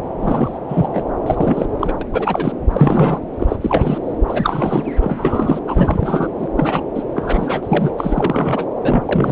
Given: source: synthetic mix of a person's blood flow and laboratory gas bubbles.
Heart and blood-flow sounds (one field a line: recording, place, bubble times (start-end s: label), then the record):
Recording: Doppler ultrasound of blood flow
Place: subclavian vein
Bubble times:
0.20-0.58 s: bubbles
0.68-1.02 s: bubbles
1.26-1.66 s: bubbles
1.79-1.94 s: bubbles
2.01-2.06 s: bubbles
2.12-2.52 s: bubbles
2.71-3.20 s: bubbles
3.39-3.56 s: bubbles
3.60-3.98 s: bubbles
4.26-4.92 s: bubbles
5.01-5.59 s: bubbles
5.67-6.28 s: bubbles
6.38-6.47 s: bubbles
6.56-6.84 s: bubbles
6.94-7.03 s: bubbles
7.15-7.91 s: bubbles
7.97-8.67 s: bubbles
8.84-9.32 s: bubbles
From the record:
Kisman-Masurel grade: 343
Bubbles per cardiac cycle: rolling drumbeat, 9 or more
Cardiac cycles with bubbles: 100%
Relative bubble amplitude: loud (0.450 to 0.775)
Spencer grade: 3 (all of the cardiac periods contain showers or single bubble signals, but not dominating or overriding the cardiac motion signals)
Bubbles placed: anywhere in the cardiac cycle